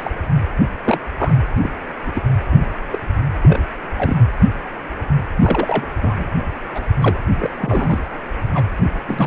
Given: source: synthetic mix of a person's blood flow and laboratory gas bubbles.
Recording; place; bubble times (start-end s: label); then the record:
Doppler ultrasound of blood flow; precordium
0.00-0.10 s: bubbles
0.84-0.98 s: bubbles
1.18-1.35 s: bubbles
1.62-1.73 s: bubbles
2.06-2.22 s: bubbles
2.52-2.67 s: bubbles
2.91-2.99 s: bubbles
3.43-3.59 s: bubbles
3.97-4.17 s: bubbles
5.41-5.86 s: bubbles
6.01-6.25 s: bubbles
6.74-6.82 s: bubbles
7.01-7.18 s: bubbles
7.39-7.50 s: bubbles
7.57-7.99 s: bubbles
8.54-8.65 s: bubbles
8.77-8.91 s: bubbles
9.08-9.27 s: bubbles
From the record:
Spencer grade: 3 (all of the cardiac periods contain showers or single bubble signals, but not dominating or overriding the cardiac motion signals); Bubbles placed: anywhere in the cardiac cycle